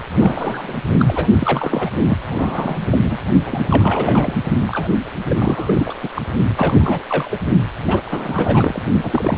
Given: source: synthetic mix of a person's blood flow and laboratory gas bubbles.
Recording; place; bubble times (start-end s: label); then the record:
Doppler ultrasound of blood flow; precordium
0.20-0.77 s: bubbles
0.98-1.27 s: bubbles
1.39-1.90 s: bubbles
1.98-2.17 s: bubbles
2.26-2.79 s: bubbles
2.91-2.98 s: bubbles
3.03-3.18 s: bubbles
3.45-4.34 s: bubbles
4.67-4.88 s: bubbles
5.25-5.36 s: bubbles
5.39-5.95 s: bubbles
6.03-6.08 s: bubbles
6.16-6.22 s: bubbles
6.56-7.04 s: bubbles
7.09-7.41 s: bubbles
7.87-8.02 s: bubbles
8.10-8.82 s: bubbles
9.03-9.38 s: bubbles
From the record:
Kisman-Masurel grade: 342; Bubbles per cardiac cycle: rolling drumbeat, 9 or more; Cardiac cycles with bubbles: 100%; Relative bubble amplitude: moderate (0.250 to 0.450); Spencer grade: 3 (all of the cardiac periods contain showers or single bubble signals, but not dominating or overriding the cardiac motion signals); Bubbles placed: only in the low amplitude regions of the cardiac cycle